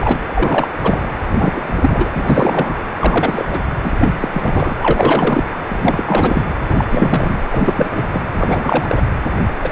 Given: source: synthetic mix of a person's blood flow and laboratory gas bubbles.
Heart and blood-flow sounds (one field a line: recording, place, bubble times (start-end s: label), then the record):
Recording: Doppler ultrasound of blood flow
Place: precordium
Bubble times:
0.00-0.20 s: bubbles
0.34-0.68 s: bubbles
0.83-1.00 s: bubbles
1.31-2.10 s: bubbles
2.16-2.74 s: bubbles
2.97-3.45 s: bubbles
3.51-3.60 s: bubbles
3.83-3.94 s: bubbles
4.01-4.13 s: bubbles
4.20-4.29 s: bubbles
4.33-4.76 s: bubbles
4.80-5.50 s: bubbles
5.68-6.04 s: bubbles
6.07-6.45 s: bubbles
6.69-7.47 s: bubbles
7.51-8.21 s: bubbles
8.34-9.01 s: bubbles
9.62-9.72 s: bubbles
From the record:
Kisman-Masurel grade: 343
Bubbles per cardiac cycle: rolling drumbeat, 9 or more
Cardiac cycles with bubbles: 100%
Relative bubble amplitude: loud (0.450 to 0.775)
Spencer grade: 3 (all of the cardiac periods contain showers or single bubble signals, but not dominating or overriding the cardiac motion signals)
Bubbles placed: anywhere in the cardiac cycle